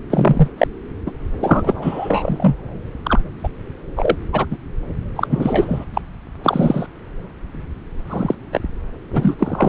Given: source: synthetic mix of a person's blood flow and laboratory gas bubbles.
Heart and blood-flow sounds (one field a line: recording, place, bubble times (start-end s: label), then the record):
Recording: Doppler ultrasound of blood flow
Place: subclavian vein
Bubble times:
0.10-0.48 s: bubbles
0.58-0.67 s: bubbles
1.06-1.11 s: bubbles
1.40-2.54 s: bubbles
3.03-3.20 s: bubbles
3.44-3.48 s: bubbles
3.96-4.15 s: bubbles
4.33-4.45 s: bubbles
4.50-4.57 s: bubbles
5.16-5.85 s: bubbles
5.94-6.01 s: bubbles
6.43-6.87 s: bubbles
8.10-8.35 s: bubbles
8.52-8.60 s: bubbles
9.12-9.69 s: bubbles
From the record:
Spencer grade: 3 (all of the cardiac periods contain showers or single bubble signals, but not dominating or overriding the cardiac motion signals)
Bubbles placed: anywhere in the cardiac cycle